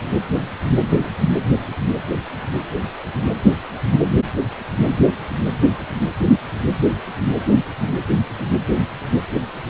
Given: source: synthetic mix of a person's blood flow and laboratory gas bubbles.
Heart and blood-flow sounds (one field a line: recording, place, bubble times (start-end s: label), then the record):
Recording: Doppler ultrasound of blood flow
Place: precordium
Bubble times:
no bubbles
From the record:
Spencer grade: 0 (complete lack of bubble signals)